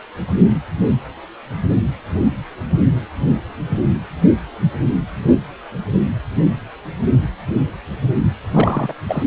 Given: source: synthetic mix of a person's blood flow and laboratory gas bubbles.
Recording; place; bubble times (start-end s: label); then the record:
Doppler ultrasound of blood flow; precordium
8.54-8.94 s: bubbles
9.08-9.23 s: bubbles
From the record:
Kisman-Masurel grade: 213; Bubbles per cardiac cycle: several, 3 to 8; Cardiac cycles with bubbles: 1 to 10%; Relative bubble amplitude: loud (0.450 to 0.775); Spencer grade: 1 (occasional bubble signal discernible with the cardiac motion signal, with majority of cardiac periods free of bubbles); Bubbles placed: anywhere in the cardiac cycle